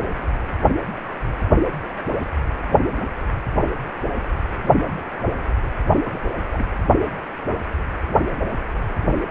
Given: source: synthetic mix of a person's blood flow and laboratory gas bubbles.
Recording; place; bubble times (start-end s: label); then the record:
Doppler ultrasound of blood flow; precordium
5.98-6.21 s: bubbles
6.53-6.65 s: bubbles
From the record:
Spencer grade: 1 (occasional bubble signal discernible with the cardiac motion signal, with majority of cardiac periods free of bubbles); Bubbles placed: anywhere in the cardiac cycle